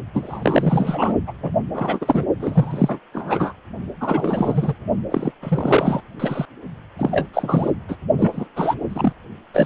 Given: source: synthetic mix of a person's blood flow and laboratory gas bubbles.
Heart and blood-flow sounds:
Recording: Doppler ultrasound of blood flow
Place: precordium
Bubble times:
0.13-1.14 s: bubbles
1.27-1.32 s: bubbles
1.42-1.51 s: bubbles
1.73-2.25 s: bubbles
2.38-2.99 s: bubbles
3.12-3.53 s: bubbles
4.00-4.74 s: bubbles
5.11-5.32 s: bubbles
5.42-6.01 s: bubbles
6.19-6.46 s: bubbles
6.98-7.27 s: bubbles
7.33-7.71 s: bubbles
7.88-7.96 s: bubbles
8.18-8.48 s: bubbles
8.56-8.75 s: bubbles
8.88-9.12 s: bubbles
9.53-9.66 s: bubbles
From the record:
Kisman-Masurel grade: 343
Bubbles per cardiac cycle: rolling drumbeat, 9 or more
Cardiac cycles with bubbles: 100%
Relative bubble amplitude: loud (0.450 to 0.775)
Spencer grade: 3 (all of the cardiac periods contain showers or single bubble signals, but not dominating or overriding the cardiac motion signals)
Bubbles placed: only in the low amplitude regions of the cardiac cycle

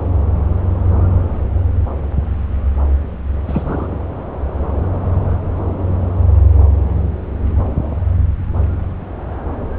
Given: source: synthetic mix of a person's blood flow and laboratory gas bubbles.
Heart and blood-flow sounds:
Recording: Doppler ultrasound of blood flow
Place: subclavian vein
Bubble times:
3.45-3.96 s: bubbles
From the record:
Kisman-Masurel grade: 211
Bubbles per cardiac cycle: several, 3 to 8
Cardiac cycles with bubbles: 1 to 10%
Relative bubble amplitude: barely perceptible (0.100 to 0.250)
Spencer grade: 1 (occasional bubble signal discernible with the cardiac motion signal, with majority of cardiac periods free of bubbles)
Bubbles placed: anywhere in the cardiac cycle

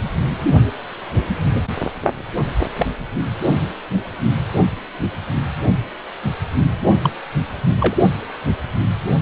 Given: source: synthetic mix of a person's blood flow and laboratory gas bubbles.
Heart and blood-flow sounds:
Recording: Doppler ultrasound of blood flow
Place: precordium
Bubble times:
2.75-2.87 s: bubbles
7.01-7.10 s: bubbles
7.80-7.96 s: bubbles
From the record:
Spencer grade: 2 (many but less than half of the cardiac periods contain bubble signals, singularly or in groups)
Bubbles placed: only in the low amplitude regions of the cardiac cycle

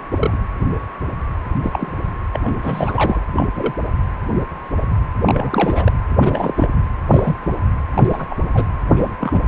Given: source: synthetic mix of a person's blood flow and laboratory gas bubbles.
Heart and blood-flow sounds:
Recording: Doppler ultrasound of blood flow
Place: precordium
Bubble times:
0.12-0.38 s: bubbles
1.63-1.92 s: bubbles
2.33-3.21 s: bubbles
3.35-3.46 s: bubbles
3.55-3.74 s: bubbles
5.25-5.92 s: bubbles
6.13-6.54 s: bubbles
6.57-6.67 s: bubbles
7.10-7.36 s: bubbles
7.42-7.55 s: bubbles
7.93-8.26 s: bubbles
8.30-8.36 s: bubbles
8.54-8.67 s: bubbles
8.96-9.16 s: bubbles
9.20-9.40 s: bubbles
From the record:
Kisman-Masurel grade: 232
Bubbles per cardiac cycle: several, 3 to 8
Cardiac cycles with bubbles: 50 to 99%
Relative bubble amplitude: moderate (0.250 to 0.450)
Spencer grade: 3 (all of the cardiac periods contain showers or single bubble signals, but not dominating or overriding the cardiac motion signals)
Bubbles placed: anywhere in the cardiac cycle

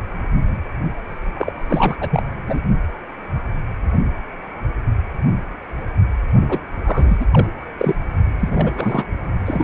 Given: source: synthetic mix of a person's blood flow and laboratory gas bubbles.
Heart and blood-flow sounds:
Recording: Doppler ultrasound of blood flow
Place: precordium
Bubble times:
1.34-1.51 s: bubbles
1.55-1.95 s: bubbles
2.00-2.23 s: bubbles
2.47-2.60 s: bubbles
6.49-6.59 s: bubbles
6.84-7.17 s: bubbles
7.20-7.25 s: bubbles
7.31-7.47 s: bubbles
7.77-7.95 s: bubbles
8.40-9.08 s: bubbles
9.46-9.64 s: bubbles
From the record:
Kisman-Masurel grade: 332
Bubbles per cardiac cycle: rolling drumbeat, 9 or more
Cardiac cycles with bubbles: 50 to 99%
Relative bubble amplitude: moderate (0.250 to 0.450)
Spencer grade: 3 (all of the cardiac periods contain showers or single bubble signals, but not dominating or overriding the cardiac motion signals)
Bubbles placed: only in the low amplitude regions of the cardiac cycle

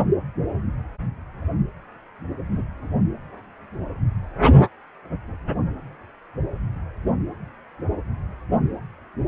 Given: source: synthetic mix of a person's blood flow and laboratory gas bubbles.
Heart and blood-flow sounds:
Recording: Doppler ultrasound of blood flow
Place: precordium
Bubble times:
2.52-2.62 s: bubbles
From the record:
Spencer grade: 1 (occasional bubble signal discernible with the cardiac motion signal, with majority of cardiac periods free of bubbles)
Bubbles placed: only in the low amplitude regions of the cardiac cycle

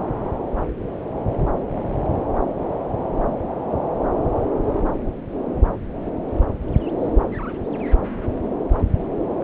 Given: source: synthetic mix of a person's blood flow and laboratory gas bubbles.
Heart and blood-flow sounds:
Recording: Doppler ultrasound of blood flow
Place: subclavian vein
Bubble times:
no bubbles
From the record:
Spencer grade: 0 (complete lack of bubble signals)

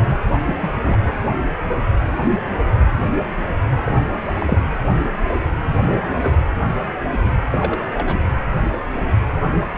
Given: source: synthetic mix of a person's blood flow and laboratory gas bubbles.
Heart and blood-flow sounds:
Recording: Doppler ultrasound of blood flow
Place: precordium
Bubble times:
0.46-0.56 s: bubbles
0.62-0.70 s: bubbles
0.83-0.98 s: bubbles
3.85-3.98 s: bubbles
4.22-4.61 s: bubbles
5.71-6.37 s: bubbles
7.52-7.84 s: bubbles
7.94-8.19 s: bubbles
From the record:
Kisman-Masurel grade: 221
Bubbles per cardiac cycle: several, 3 to 8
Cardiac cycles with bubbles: 10 to 50%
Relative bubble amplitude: barely perceptible (0.100 to 0.250)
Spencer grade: 2 (many but less than half of the cardiac periods contain bubble signals, singularly or in groups)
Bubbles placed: anywhere in the cardiac cycle

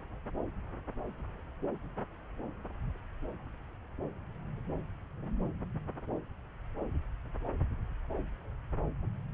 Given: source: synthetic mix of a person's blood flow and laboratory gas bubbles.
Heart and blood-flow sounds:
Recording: Doppler ultrasound of blood flow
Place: subclavian vein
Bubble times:
no bubbles
From the record:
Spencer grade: 0 (complete lack of bubble signals)

